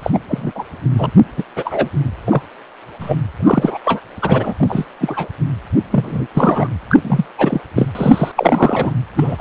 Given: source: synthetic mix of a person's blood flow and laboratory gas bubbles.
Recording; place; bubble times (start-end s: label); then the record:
Doppler ultrasound of blood flow; precordium
0.00-0.10 s: bubbles
0.12-0.20 s: bubbles
0.28-0.52 s: bubbles
0.55-0.64 s: bubbles
0.98-1.10 s: bubbles
1.36-1.44 s: bubbles
1.56-1.89 s: bubbles
2.27-2.42 s: bubbles
3.00-3.15 s: bubbles
3.39-3.77 s: bubbles
3.85-4.01 s: bubbles
4.21-4.54 s: bubbles
4.59-4.85 s: bubbles
5.01-5.28 s: bubbles
5.91-6.27 s: bubbles
6.34-6.68 s: bubbles
6.89-7.27 s: bubbles
7.38-7.61 s: bubbles
7.75-7.89 s: bubbles
7.95-8.32 s: bubbles
8.36-8.92 s: bubbles
9.16-9.36 s: bubbles
9.38-9.41 s: bubbles
From the record:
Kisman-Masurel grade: 243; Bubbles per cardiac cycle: several, 3 to 8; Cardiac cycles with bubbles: 100%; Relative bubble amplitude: loud (0.450 to 0.775); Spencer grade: 3 (all of the cardiac periods contain showers or single bubble signals, but not dominating or overriding the cardiac motion signals); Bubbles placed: anywhere in the cardiac cycle